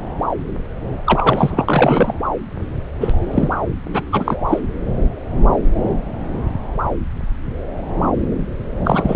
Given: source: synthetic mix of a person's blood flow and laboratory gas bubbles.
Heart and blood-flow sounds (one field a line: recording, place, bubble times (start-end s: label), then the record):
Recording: Doppler ultrasound of blood flow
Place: subclavian vein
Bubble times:
1.04-1.66 s: bubbles
1.69-2.14 s: bubbles
3.00-3.56 s: bubbles
3.94-4.01 s: bubbles
4.11-4.36 s: bubbles
4.48-4.59 s: bubbles
8.85-9.16 s: bubbles
From the record:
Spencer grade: 2 (many but less than half of the cardiac periods contain bubble signals, singularly or in groups)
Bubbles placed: anywhere in the cardiac cycle